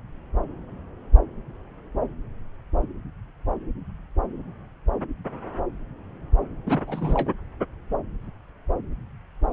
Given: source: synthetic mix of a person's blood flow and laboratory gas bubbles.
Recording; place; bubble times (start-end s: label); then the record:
Doppler ultrasound of blood flow; subclavian vein
6.66-6.79 s: bubbles
6.87-7.32 s: bubbles
From the record:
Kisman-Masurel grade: 221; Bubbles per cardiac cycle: several, 3 to 8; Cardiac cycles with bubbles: 10 to 50%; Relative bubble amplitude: barely perceptible (0.100 to 0.250); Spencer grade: 2 (many but less than half of the cardiac periods contain bubble signals, singularly or in groups); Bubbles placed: anywhere in the cardiac cycle